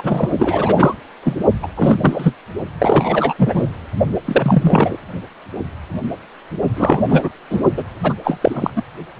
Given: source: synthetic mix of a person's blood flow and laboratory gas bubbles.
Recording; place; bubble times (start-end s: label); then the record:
Doppler ultrasound of blood flow; precordium
0.00-0.30 s: bubbles
0.38-0.96 s: bubbles
1.23-1.35 s: bubbles
1.62-1.67 s: bubbles
1.76-2.36 s: bubbles
2.79-3.34 s: bubbles
3.38-3.62 s: bubbles
4.25-4.96 s: bubbles
6.75-7.29 s: bubbles
7.50-7.61 s: bubbles
7.77-7.83 s: bubbles
8.03-8.13 s: bubbles
8.24-8.70 s: bubbles
8.75-8.82 s: bubbles
From the record:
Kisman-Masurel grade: 333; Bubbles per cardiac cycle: rolling drumbeat, 9 or more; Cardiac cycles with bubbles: 50 to 99%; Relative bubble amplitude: loud (0.450 to 0.775); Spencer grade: 3 (all of the cardiac periods contain showers or single bubble signals, but not dominating or overriding the cardiac motion signals); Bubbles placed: only in the low amplitude regions of the cardiac cycle